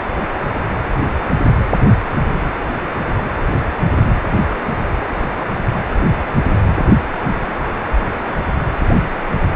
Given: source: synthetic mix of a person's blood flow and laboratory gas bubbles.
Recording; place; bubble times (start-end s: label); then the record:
Doppler ultrasound of blood flow; precordium
no bubbles
From the record:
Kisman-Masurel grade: 000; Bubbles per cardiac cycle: 0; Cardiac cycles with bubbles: 0%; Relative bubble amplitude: no bubbles discernible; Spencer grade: 0 (complete lack of bubble signals)